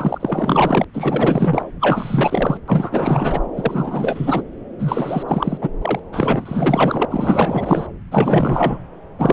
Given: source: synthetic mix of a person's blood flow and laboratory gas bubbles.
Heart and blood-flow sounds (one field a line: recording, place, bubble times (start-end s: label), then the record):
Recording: Doppler ultrasound of blood flow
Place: subclavian vein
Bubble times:
0.00-0.84 s: bubbles
0.94-1.62 s: bubbles
1.80-2.58 s: bubbles
2.67-3.40 s: bubbles
3.56-4.43 s: bubbles
4.79-5.23 s: bubbles
5.28-5.57 s: bubbles
5.61-5.69 s: bubbles
5.81-5.99 s: bubbles
6.12-7.05 s: bubbles
7.10-7.87 s: bubbles
8.11-8.79 s: bubbles
9.19-9.33 s: bubbles
From the record:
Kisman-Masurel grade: 444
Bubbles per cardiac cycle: continuous sound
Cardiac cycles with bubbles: 100%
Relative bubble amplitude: maximal (0.775 to 0.999)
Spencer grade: 4 (maximum detectable bubble signal sounding continuously throughout systole and diastole of every cardiac period, and overriding the amplitude of the normal cardiac signals)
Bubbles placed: anywhere in the cardiac cycle